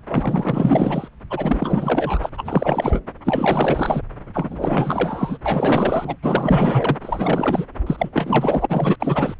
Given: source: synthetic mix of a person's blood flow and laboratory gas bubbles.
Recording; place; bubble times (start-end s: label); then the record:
Doppler ultrasound of blood flow; subclavian vein
0.08-1.08 s: bubbles
1.30-2.29 s: bubbles
2.33-3.00 s: bubbles
3.25-4.02 s: bubbles
4.33-5.38 s: bubbles
5.46-6.17 s: bubbles
6.22-6.97 s: bubbles
7.01-7.65 s: bubbles
7.87-8.10 s: bubbles
8.13-8.66 s: bubbles
8.69-8.96 s: bubbles
9.00-9.35 s: bubbles
From the record:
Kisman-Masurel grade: 444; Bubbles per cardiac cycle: continuous sound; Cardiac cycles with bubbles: 100%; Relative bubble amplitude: maximal (0.775 to 0.999); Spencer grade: 4 (maximum detectable bubble signal sounding continuously throughout systole and diastole of every cardiac period, and overriding the amplitude of the normal cardiac signals); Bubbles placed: anywhere in the cardiac cycle